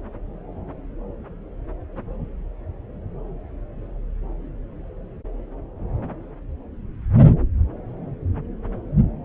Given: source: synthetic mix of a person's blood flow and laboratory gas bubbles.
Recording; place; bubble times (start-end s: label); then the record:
Doppler ultrasound of blood flow; subclavian vein
no bubbles
From the record:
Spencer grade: 0 (complete lack of bubble signals)